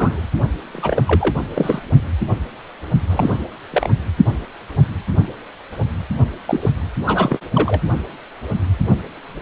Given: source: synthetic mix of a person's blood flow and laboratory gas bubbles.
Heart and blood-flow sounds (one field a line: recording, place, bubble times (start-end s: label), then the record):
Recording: Doppler ultrasound of blood flow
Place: precordium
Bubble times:
0.00-0.21 s: bubbles
0.61-1.04 s: bubbles
1.07-1.35 s: bubbles
1.54-1.82 s: bubbles
3.09-3.37 s: bubbles
3.71-3.89 s: bubbles
6.46-6.70 s: bubbles
7.06-7.38 s: bubbles
7.54-7.81 s: bubbles
From the record:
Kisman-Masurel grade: 222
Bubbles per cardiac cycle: several, 3 to 8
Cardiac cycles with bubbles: 10 to 50%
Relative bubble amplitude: moderate (0.250 to 0.450)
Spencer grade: 2 (many but less than half of the cardiac periods contain bubble signals, singularly or in groups)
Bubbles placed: only in the low amplitude regions of the cardiac cycle